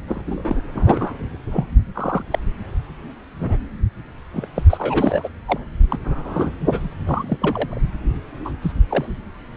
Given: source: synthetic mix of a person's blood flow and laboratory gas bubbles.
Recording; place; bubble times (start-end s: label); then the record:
Doppler ultrasound of blood flow; subclavian vein
0.07-0.61 s: bubbles
0.74-1.12 s: bubbles
1.51-1.67 s: bubbles
1.95-2.24 s: bubbles
2.31-2.39 s: bubbles
3.40-3.62 s: bubbles
4.33-4.48 s: bubbles
4.55-4.63 s: bubbles
4.69-5.29 s: bubbles
5.47-5.58 s: bubbles
5.90-5.97 s: bubbles
6.04-6.55 s: bubbles
6.60-6.88 s: bubbles
7.06-7.82 s: bubbles
8.45-8.51 s: bubbles
8.62-8.72 s: bubbles
8.89-9.06 s: bubbles
From the record:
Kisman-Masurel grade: 232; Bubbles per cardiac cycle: several, 3 to 8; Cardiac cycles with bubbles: 50 to 99%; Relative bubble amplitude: moderate (0.250 to 0.450); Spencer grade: 3 (all of the cardiac periods contain showers or single bubble signals, but not dominating or overriding the cardiac motion signals); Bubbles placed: anywhere in the cardiac cycle